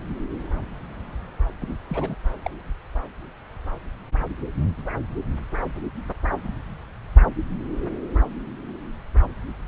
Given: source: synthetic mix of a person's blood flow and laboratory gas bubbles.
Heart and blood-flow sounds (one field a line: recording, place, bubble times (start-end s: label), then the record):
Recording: Doppler ultrasound of blood flow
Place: subclavian vein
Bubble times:
1.61-1.77 s: bubbles
1.89-2.17 s: bubbles
2.44-2.51 s: bubbles
From the record:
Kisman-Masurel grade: 211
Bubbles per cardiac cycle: several, 3 to 8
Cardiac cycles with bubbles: 1 to 10%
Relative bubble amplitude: barely perceptible (0.100 to 0.250)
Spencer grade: 1 (occasional bubble signal discernible with the cardiac motion signal, with majority of cardiac periods free of bubbles)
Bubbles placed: anywhere in the cardiac cycle